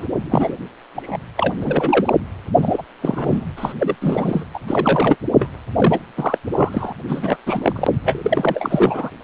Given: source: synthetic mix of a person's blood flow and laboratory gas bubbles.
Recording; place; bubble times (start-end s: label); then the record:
Doppler ultrasound of blood flow; precordium
0.00-0.05 s: bubbles
0.22-0.57 s: bubbles
0.96-1.18 s: bubbles
1.36-1.54 s: bubbles
1.61-2.13 s: bubbles
2.62-2.82 s: bubbles
3.01-3.44 s: bubbles
3.56-3.74 s: bubbles
3.78-3.95 s: bubbles
4.01-4.45 s: bubbles
4.54-4.60 s: bubbles
4.67-5.16 s: bubbles
5.34-5.50 s: bubbles
5.76-6.00 s: bubbles
6.17-6.38 s: bubbles
6.52-6.93 s: bubbles
7.08-7.36 s: bubbles
7.46-7.88 s: bubbles
8.05-9.11 s: bubbles
From the record:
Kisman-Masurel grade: 343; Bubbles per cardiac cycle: rolling drumbeat, 9 or more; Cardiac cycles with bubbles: 100%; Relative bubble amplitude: loud (0.450 to 0.775); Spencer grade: 3 (all of the cardiac periods contain showers or single bubble signals, but not dominating or overriding the cardiac motion signals); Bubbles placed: anywhere in the cardiac cycle